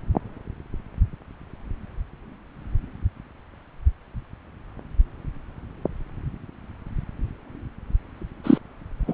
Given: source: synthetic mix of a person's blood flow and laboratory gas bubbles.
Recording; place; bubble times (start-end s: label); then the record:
Doppler ultrasound of blood flow; subclavian vein
8.44-8.58 s: bubbles
9.07-9.14 s: bubbles
From the record:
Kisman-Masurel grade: 123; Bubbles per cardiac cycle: 1 to 2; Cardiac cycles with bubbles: 10 to 50%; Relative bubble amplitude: loud (0.450 to 0.775); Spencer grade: 2 (many but less than half of the cardiac periods contain bubble signals, singularly or in groups); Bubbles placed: anywhere in the cardiac cycle